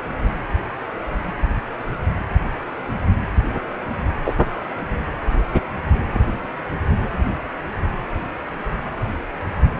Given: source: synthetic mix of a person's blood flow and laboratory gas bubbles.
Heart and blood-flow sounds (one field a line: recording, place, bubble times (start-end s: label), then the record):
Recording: Doppler ultrasound of blood flow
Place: precordium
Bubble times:
4.24-4.35 s: bubbles
From the record:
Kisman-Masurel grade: 113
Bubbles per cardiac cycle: 1 to 2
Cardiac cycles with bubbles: 1 to 10%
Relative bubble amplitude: loud (0.450 to 0.775)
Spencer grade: 1 (occasional bubble signal discernible with the cardiac motion signal, with majority of cardiac periods free of bubbles)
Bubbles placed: anywhere in the cardiac cycle